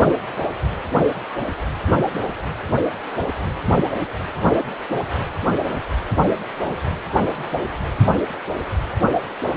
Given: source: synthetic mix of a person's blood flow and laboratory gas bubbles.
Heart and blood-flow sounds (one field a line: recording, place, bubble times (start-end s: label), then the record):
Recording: Doppler ultrasound of blood flow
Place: precordium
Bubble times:
no bubbles
From the record:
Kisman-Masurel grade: 000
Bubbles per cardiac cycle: 0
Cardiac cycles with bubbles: 0%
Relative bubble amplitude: no bubbles discernible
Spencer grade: 0 (complete lack of bubble signals)